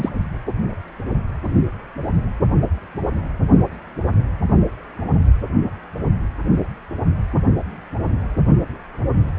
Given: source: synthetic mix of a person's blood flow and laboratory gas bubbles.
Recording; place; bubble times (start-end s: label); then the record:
Doppler ultrasound of blood flow; precordium
0.00-0.09 s: bubbles
From the record:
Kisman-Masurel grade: 212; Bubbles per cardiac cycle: several, 3 to 8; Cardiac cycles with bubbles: 1 to 10%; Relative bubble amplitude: moderate (0.250 to 0.450); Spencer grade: 1 (occasional bubble signal discernible with the cardiac motion signal, with majority of cardiac periods free of bubbles); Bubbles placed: only in the low amplitude regions of the cardiac cycle